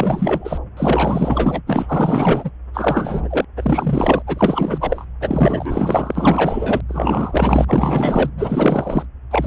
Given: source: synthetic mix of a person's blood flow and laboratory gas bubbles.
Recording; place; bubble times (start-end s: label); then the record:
Doppler ultrasound of blood flow; subclavian vein
0.00-0.58 s: bubbles
0.77-1.61 s: bubbles
1.67-2.50 s: bubbles
2.73-3.45 s: bubbles
3.56-4.22 s: bubbles
4.26-5.05 s: bubbles
5.20-6.80 s: bubbles
6.88-8.30 s: bubbles
8.38-9.05 s: bubbles
9.30-9.47 s: bubbles
From the record:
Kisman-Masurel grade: 444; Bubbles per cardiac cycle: continuous sound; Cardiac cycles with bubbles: 100%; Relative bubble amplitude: maximal (0.775 to 0.999); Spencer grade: 4 (maximum detectable bubble signal sounding continuously throughout systole and diastole of every cardiac period, and overriding the amplitude of the normal cardiac signals); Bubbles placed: anywhere in the cardiac cycle